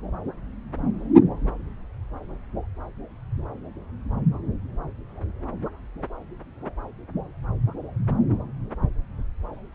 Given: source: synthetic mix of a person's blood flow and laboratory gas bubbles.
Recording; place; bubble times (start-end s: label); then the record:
Doppler ultrasound of blood flow; subclavian vein
no bubbles
From the record:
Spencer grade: 0 (complete lack of bubble signals)